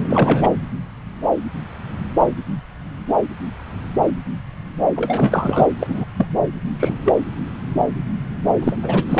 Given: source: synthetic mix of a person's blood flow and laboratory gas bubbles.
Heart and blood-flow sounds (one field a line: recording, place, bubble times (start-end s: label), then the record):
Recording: Doppler ultrasound of blood flow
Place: subclavian vein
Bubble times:
0.08-0.49 s: bubbles
4.96-5.67 s: bubbles
5.79-6.04 s: bubbles
6.17-6.25 s: bubbles
6.79-6.98 s: bubbles
7.05-7.16 s: bubbles
8.61-8.77 s: bubbles
8.82-9.04 s: bubbles
9.09-9.20 s: bubbles
From the record:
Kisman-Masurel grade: 233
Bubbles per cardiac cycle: several, 3 to 8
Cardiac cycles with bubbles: 50 to 99%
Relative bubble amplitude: loud (0.450 to 0.775)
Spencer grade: 3 (all of the cardiac periods contain showers or single bubble signals, but not dominating or overriding the cardiac motion signals)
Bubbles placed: anywhere in the cardiac cycle